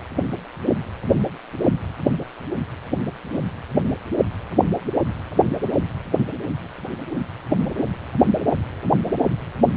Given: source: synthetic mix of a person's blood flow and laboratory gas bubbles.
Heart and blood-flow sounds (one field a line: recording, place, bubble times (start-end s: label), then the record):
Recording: Doppler ultrasound of blood flow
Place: precordium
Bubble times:
no bubbles
From the record:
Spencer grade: 0 (complete lack of bubble signals)